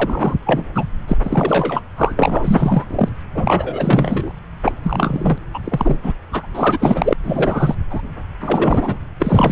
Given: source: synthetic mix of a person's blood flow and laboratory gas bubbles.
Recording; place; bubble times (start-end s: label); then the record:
Doppler ultrasound of blood flow; subclavian vein
0.00-0.34 s: bubbles
0.46-0.65 s: bubbles
0.74-0.86 s: bubbles
1.08-1.17 s: bubbles
1.23-1.81 s: bubbles
1.97-2.85 s: bubbles
2.91-3.08 s: bubbles
3.35-4.31 s: bubbles
4.64-4.72 s: bubbles
4.82-5.38 s: bubbles
5.53-5.59 s: bubbles
5.64-5.96 s: bubbles
6.03-6.12 s: bubbles
6.31-6.46 s: bubbles
6.54-7.13 s: bubbles
7.23-7.75 s: bubbles
7.90-8.02 s: bubbles
8.41-8.98 s: bubbles
9.19-9.52 s: bubbles
From the record:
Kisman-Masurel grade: 333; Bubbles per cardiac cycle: rolling drumbeat, 9 or more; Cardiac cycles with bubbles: 50 to 99%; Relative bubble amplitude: loud (0.450 to 0.775); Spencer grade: 3 (all of the cardiac periods contain showers or single bubble signals, but not dominating or overriding the cardiac motion signals); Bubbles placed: anywhere in the cardiac cycle